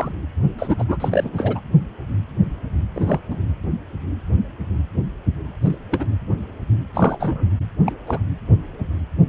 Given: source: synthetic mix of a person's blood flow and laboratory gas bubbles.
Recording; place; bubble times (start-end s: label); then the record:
Doppler ultrasound of blood flow; precordium
0.00-0.16 s: bubbles
0.58-0.75 s: bubbles
0.78-0.84 s: bubbles
0.88-1.61 s: bubbles
2.95-3.20 s: bubbles
3.30-3.37 s: bubbles
5.61-5.76 s: bubbles
5.91-6.05 s: bubbles
6.94-7.47 s: bubbles
7.86-7.92 s: bubbles
8.06-8.19 s: bubbles
From the record:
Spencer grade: 2 (many but less than half of the cardiac periods contain bubble signals, singularly or in groups); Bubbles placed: anywhere in the cardiac cycle